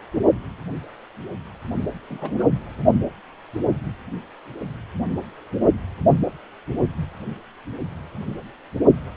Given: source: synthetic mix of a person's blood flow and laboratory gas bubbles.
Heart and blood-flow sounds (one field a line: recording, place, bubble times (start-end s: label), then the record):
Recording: Doppler ultrasound of blood flow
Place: precordium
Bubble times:
2.09-2.44 s: bubbles
From the record:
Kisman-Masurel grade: 211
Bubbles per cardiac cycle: several, 3 to 8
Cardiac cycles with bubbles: 1 to 10%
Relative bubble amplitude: barely perceptible (0.100 to 0.250)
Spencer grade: 1 (occasional bubble signal discernible with the cardiac motion signal, with majority of cardiac periods free of bubbles)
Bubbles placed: only in the low amplitude regions of the cardiac cycle